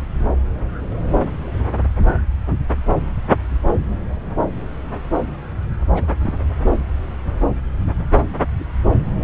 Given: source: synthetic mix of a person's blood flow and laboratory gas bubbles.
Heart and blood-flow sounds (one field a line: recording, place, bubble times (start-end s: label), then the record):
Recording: Doppler ultrasound of blood flow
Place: subclavian vein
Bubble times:
5.95-6.07 s: bubbles
6.22-6.40 s: bubbles
From the record:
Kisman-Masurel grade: 111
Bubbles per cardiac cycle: 1 to 2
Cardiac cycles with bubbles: 1 to 10%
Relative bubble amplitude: barely perceptible (0.100 to 0.250)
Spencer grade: 1 (occasional bubble signal discernible with the cardiac motion signal, with majority of cardiac periods free of bubbles)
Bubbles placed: anywhere in the cardiac cycle